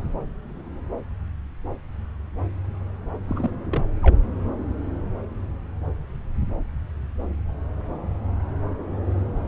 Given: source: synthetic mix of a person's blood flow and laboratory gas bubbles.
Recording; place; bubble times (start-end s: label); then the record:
Doppler ultrasound of blood flow; subclavian vein
3.27-3.50 s: bubbles
3.67-3.82 s: bubbles
4.02-4.17 s: bubbles
From the record:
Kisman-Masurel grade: 211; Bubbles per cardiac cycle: several, 3 to 8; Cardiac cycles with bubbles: 1 to 10%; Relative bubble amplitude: barely perceptible (0.100 to 0.250); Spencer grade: 1 (occasional bubble signal discernible with the cardiac motion signal, with majority of cardiac periods free of bubbles); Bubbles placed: anywhere in the cardiac cycle